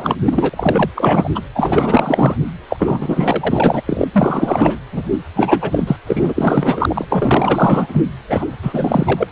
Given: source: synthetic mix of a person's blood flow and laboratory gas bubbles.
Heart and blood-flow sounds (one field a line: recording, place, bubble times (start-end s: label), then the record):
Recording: Doppler ultrasound of blood flow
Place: precordium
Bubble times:
0.00-0.15 s: bubbles
0.24-0.90 s: bubbles
0.95-1.30 s: bubbles
1.35-1.41 s: bubbles
1.54-2.37 s: bubbles
2.69-3.83 s: bubbles
3.88-4.08 s: bubbles
4.13-4.79 s: bubbles
4.92-5.03 s: bubbles
5.12-5.19 s: bubbles
5.36-5.96 s: bubbles
6.07-7.05 s: bubbles
7.09-8.02 s: bubbles
8.28-8.46 s: bubbles
8.62-9.32 s: bubbles
From the record:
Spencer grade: 4 (maximum detectable bubble signal sounding continuously throughout systole and diastole of every cardiac period, and overriding the amplitude of the normal cardiac signals)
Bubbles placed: anywhere in the cardiac cycle